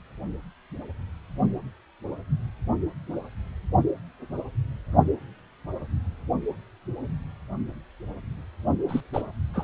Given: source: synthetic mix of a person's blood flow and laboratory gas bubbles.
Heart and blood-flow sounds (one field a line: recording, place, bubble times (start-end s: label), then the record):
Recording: Doppler ultrasound of blood flow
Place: precordium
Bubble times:
8.88-9.00 s: bubbles
9.13-9.22 s: bubbles
9.54-9.64 s: bubbles
From the record:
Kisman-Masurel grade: 211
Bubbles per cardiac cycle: several, 3 to 8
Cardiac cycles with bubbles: 1 to 10%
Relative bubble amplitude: barely perceptible (0.100 to 0.250)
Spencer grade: 1 (occasional bubble signal discernible with the cardiac motion signal, with majority of cardiac periods free of bubbles)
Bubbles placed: only in the low amplitude regions of the cardiac cycle